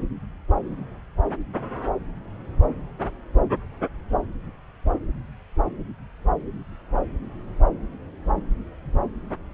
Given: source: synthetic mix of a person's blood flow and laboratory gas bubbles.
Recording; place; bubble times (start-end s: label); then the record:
Doppler ultrasound of blood flow; subclavian vein
no bubbles
From the record:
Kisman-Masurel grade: 000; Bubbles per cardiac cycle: 0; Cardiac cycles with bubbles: 0%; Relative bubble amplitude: no bubbles discernible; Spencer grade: 0 (complete lack of bubble signals)